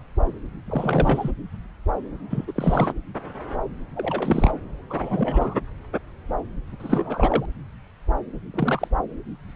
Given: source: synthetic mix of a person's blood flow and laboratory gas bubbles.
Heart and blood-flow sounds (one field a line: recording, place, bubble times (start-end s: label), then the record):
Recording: Doppler ultrasound of blood flow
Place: subclavian vein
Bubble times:
0.66-1.31 s: bubbles
2.31-2.44 s: bubbles
2.47-2.52 s: bubbles
2.55-2.94 s: bubbles
3.96-4.51 s: bubbles
4.90-5.54 s: bubbles
6.79-7.46 s: bubbles
8.53-8.88 s: bubbles
From the record:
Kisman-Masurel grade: 232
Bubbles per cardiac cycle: several, 3 to 8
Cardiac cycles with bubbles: 50 to 99%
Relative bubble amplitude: moderate (0.250 to 0.450)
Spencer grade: 3 (all of the cardiac periods contain showers or single bubble signals, but not dominating or overriding the cardiac motion signals)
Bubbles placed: anywhere in the cardiac cycle